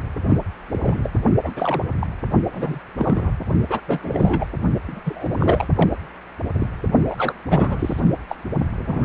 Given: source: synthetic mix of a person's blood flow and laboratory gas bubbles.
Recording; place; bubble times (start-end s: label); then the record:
Doppler ultrasound of blood flow; precordium
0.28-0.37 s: bubbles
0.73-1.10 s: bubbles
1.43-1.51 s: bubbles
1.56-1.85 s: bubbles
2.00-2.08 s: bubbles
2.52-2.79 s: bubbles
2.97-3.31 s: bubbles
3.70-3.82 s: bubbles
3.88-4.46 s: bubbles
4.83-5.00 s: bubbles
5.05-5.67 s: bubbles
5.75-5.92 s: bubbles
6.54-6.67 s: bubbles
7.08-7.15 s: bubbles
7.17-7.34 s: bubbles
7.49-8.00 s: bubbles
8.28-8.35 s: bubbles
8.78-9.05 s: bubbles
From the record:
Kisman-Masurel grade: 242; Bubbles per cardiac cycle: several, 3 to 8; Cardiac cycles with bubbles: 100%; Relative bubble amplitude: moderate (0.250 to 0.450); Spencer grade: 3 (all of the cardiac periods contain showers or single bubble signals, but not dominating or overriding the cardiac motion signals); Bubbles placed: only in the low amplitude regions of the cardiac cycle